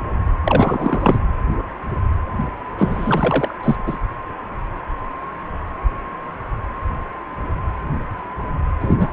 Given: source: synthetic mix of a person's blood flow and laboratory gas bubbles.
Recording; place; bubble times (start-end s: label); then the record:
Doppler ultrasound of blood flow; precordium
0.44-1.20 s: bubbles
2.77-3.54 s: bubbles
3.63-3.76 s: bubbles
3.86-3.97 s: bubbles
8.80-9.09 s: bubbles
From the record:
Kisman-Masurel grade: 223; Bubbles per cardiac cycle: several, 3 to 8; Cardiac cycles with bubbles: 10 to 50%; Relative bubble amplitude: loud (0.450 to 0.775); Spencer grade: 2 (many but less than half of the cardiac periods contain bubble signals, singularly or in groups); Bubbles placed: anywhere in the cardiac cycle